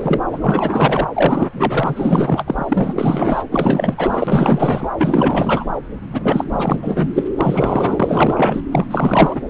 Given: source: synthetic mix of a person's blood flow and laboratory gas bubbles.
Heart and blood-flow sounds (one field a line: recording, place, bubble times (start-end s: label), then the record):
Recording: Doppler ultrasound of blood flow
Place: subclavian vein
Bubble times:
0.00-0.19 s: bubbles
0.31-0.39 s: bubbles
0.41-1.07 s: bubbles
1.13-1.48 s: bubbles
1.53-2.43 s: bubbles
2.46-2.64 s: bubbles
2.68-3.43 s: bubbles
3.51-4.89 s: bubbles
4.97-5.65 s: bubbles
6.12-6.45 s: bubbles
6.52-7.09 s: bubbles
7.14-7.25 s: bubbles
7.38-8.62 s: bubbles
8.71-8.87 s: bubbles
8.91-9.41 s: bubbles
From the record:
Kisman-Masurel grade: 444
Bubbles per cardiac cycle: continuous sound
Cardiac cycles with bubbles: 100%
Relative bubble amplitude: maximal (0.775 to 0.999)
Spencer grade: 4 (maximum detectable bubble signal sounding continuously throughout systole and diastole of every cardiac period, and overriding the amplitude of the normal cardiac signals)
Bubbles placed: anywhere in the cardiac cycle